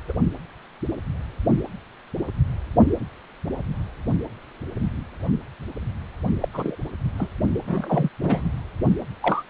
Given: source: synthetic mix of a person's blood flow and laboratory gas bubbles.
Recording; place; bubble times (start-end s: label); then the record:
Doppler ultrasound of blood flow; precordium
0.08-0.12 s: bubbles
6.41-6.49 s: bubbles
6.53-6.77 s: bubbles
7.18-7.31 s: bubbles
7.51-8.09 s: bubbles
8.22-8.49 s: bubbles
9.22-9.43 s: bubbles
From the record:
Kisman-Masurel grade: 222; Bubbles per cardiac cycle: several, 3 to 8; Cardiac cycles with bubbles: 10 to 50%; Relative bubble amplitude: moderate (0.250 to 0.450); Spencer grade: 2 (many but less than half of the cardiac periods contain bubble signals, singularly or in groups); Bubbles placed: only in the low amplitude regions of the cardiac cycle